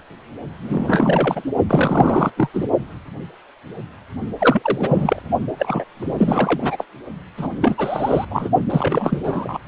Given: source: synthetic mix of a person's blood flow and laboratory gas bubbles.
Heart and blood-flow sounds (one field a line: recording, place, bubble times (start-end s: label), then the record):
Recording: Doppler ultrasound of blood flow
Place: precordium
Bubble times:
0.59-1.43 s: bubbles
1.69-2.31 s: bubbles
2.37-2.49 s: bubbles
2.53-2.67 s: bubbles
4.38-5.22 s: bubbles
5.58-5.84 s: bubbles
5.97-6.85 s: bubbles
7.37-7.47 s: bubbles
7.61-8.25 s: bubbles
8.30-8.48 s: bubbles
8.70-9.18 s: bubbles
9.23-9.61 s: bubbles
From the record:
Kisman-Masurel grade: 333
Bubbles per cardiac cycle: rolling drumbeat, 9 or more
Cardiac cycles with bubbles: 50 to 99%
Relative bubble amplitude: loud (0.450 to 0.775)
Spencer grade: 3 (all of the cardiac periods contain showers or single bubble signals, but not dominating or overriding the cardiac motion signals)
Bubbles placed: only in the low amplitude regions of the cardiac cycle